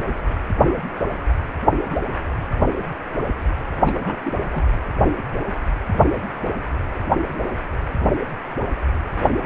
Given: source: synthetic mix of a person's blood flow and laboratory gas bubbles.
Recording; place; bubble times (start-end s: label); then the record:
Doppler ultrasound of blood flow; precordium
3.84-3.91 s: bubbles
4.03-4.17 s: bubbles
4.26-4.33 s: bubbles
4.50-4.64 s: bubbles
From the record:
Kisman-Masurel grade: 221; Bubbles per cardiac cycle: several, 3 to 8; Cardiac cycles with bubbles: 10 to 50%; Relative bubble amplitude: barely perceptible (0.100 to 0.250); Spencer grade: 2 (many but less than half of the cardiac periods contain bubble signals, singularly or in groups); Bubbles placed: anywhere in the cardiac cycle